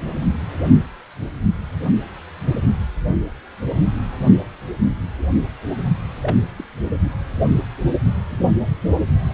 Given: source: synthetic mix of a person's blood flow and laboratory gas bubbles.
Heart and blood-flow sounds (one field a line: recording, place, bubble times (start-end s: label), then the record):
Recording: Doppler ultrasound of blood flow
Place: precordium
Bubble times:
6.22-6.37 s: bubbles
6.57-6.64 s: bubbles
8.30-8.44 s: bubbles
From the record:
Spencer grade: 2 (many but less than half of the cardiac periods contain bubble signals, singularly or in groups)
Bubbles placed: only in the low amplitude regions of the cardiac cycle